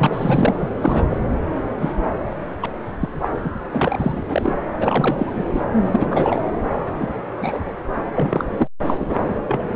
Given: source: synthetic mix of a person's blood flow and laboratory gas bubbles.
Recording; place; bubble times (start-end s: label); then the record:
Doppler ultrasound of blood flow; subclavian vein
0.00-0.69 s: bubbles
0.80-1.04 s: bubbles
1.10-1.19 s: bubbles
1.80-1.93 s: bubbles
2.62-2.66 s: bubbles
3.00-3.08 s: bubbles
3.22-3.29 s: bubbles
3.44-3.50 s: bubbles
3.72-4.56 s: bubbles
4.80-5.62 s: bubbles
5.86-6.51 s: bubbles
7.00-7.10 s: bubbles
7.41-7.73 s: bubbles
8.15-8.45 s: bubbles
8.49-8.67 s: bubbles
8.86-9.16 s: bubbles
9.48-9.76 s: bubbles
From the record:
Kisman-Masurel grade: 242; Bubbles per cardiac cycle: several, 3 to 8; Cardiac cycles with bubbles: 100%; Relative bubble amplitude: moderate (0.250 to 0.450); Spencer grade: 3 (all of the cardiac periods contain showers or single bubble signals, but not dominating or overriding the cardiac motion signals); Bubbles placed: anywhere in the cardiac cycle